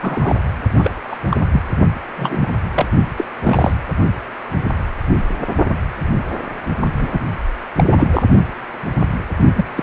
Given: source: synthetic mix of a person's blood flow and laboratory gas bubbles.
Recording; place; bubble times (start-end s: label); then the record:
Doppler ultrasound of blood flow; precordium
0.01-0.35 s: bubbles
0.79-0.91 s: bubbles
1.08-1.16 s: bubbles
1.30-1.37 s: bubbles
1.51-1.60 s: bubbles
2.17-2.49 s: bubbles
2.75-2.86 s: bubbles
3.17-3.25 s: bubbles
3.44-3.73 s: bubbles
6.99-7.20 s: bubbles
7.77-7.84 s: bubbles
7.91-8.10 s: bubbles
8.12-8.23 s: bubbles
9.55-9.64 s: bubbles
9.76-9.83 s: bubbles
From the record:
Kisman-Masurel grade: 233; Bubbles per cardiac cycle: several, 3 to 8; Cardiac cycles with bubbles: 50 to 99%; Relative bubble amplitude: loud (0.450 to 0.775); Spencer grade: 3 (all of the cardiac periods contain showers or single bubble signals, but not dominating or overriding the cardiac motion signals); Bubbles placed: only in the low amplitude regions of the cardiac cycle